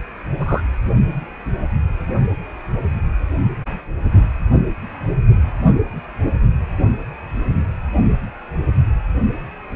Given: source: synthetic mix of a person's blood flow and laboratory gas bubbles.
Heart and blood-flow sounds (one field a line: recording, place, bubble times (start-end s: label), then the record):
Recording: Doppler ultrasound of blood flow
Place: precordium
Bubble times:
0.40-0.62 s: bubbles
From the record:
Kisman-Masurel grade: 122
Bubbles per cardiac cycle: 1 to 2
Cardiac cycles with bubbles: 10 to 50%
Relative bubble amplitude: moderate (0.250 to 0.450)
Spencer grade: 2 (many but less than half of the cardiac periods contain bubble signals, singularly or in groups)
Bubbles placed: only in the low amplitude regions of the cardiac cycle